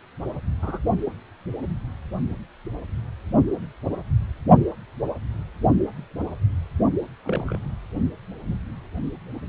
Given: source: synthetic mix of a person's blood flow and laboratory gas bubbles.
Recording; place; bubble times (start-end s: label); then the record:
Doppler ultrasound of blood flow; precordium
0.62-0.79 s: bubbles
7.25-7.58 s: bubbles
From the record:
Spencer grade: 2 (many but less than half of the cardiac periods contain bubble signals, singularly or in groups); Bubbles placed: only in the low amplitude regions of the cardiac cycle